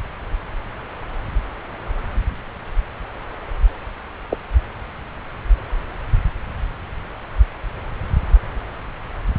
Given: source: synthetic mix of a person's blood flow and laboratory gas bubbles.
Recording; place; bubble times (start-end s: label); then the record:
Doppler ultrasound of blood flow; subclavian vein
4.30-4.38 s: bubbles
From the record:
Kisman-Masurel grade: 122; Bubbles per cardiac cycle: 1 to 2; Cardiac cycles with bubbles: 10 to 50%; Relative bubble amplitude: moderate (0.250 to 0.450); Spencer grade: 2 (many but less than half of the cardiac periods contain bubble signals, singularly or in groups); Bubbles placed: anywhere in the cardiac cycle